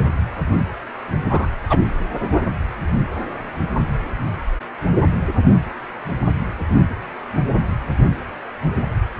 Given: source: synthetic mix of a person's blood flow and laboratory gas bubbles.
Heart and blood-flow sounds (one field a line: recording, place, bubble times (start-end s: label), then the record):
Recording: Doppler ultrasound of blood flow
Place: precordium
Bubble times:
1.28-1.47 s: bubbles
1.69-1.78 s: bubbles
From the record:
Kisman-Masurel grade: 113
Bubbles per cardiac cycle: 1 to 2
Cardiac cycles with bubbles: 1 to 10%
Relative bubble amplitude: loud (0.450 to 0.775)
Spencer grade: 1 (occasional bubble signal discernible with the cardiac motion signal, with majority of cardiac periods free of bubbles)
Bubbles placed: anywhere in the cardiac cycle